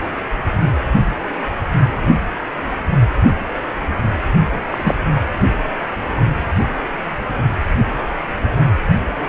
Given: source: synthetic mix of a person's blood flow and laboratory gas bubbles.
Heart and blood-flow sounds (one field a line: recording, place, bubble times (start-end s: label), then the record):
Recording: Doppler ultrasound of blood flow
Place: precordium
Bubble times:
4.71-4.98 s: bubbles
From the record:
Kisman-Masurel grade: 123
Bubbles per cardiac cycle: 1 to 2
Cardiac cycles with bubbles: 10 to 50%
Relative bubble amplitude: loud (0.450 to 0.775)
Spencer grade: 2 (many but less than half of the cardiac periods contain bubble signals, singularly or in groups)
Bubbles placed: only in the low amplitude regions of the cardiac cycle